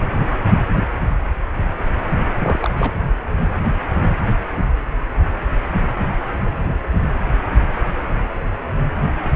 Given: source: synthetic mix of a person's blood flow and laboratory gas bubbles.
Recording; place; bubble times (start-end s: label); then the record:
Doppler ultrasound of blood flow; precordium
2.38-2.70 s: bubbles
2.78-2.92 s: bubbles
From the record:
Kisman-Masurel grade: 212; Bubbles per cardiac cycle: several, 3 to 8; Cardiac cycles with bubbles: 1 to 10%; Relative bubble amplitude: moderate (0.250 to 0.450); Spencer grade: 1 (occasional bubble signal discernible with the cardiac motion signal, with majority of cardiac periods free of bubbles); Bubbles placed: anywhere in the cardiac cycle